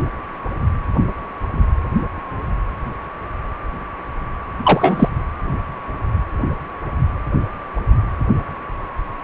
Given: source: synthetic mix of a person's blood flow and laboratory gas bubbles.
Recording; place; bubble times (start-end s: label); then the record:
Doppler ultrasound of blood flow; precordium
4.63-5.09 s: bubbles
From the record:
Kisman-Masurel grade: 213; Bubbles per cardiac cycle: several, 3 to 8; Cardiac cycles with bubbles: 1 to 10%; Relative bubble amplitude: loud (0.450 to 0.775); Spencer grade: 1 (occasional bubble signal discernible with the cardiac motion signal, with majority of cardiac periods free of bubbles); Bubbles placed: anywhere in the cardiac cycle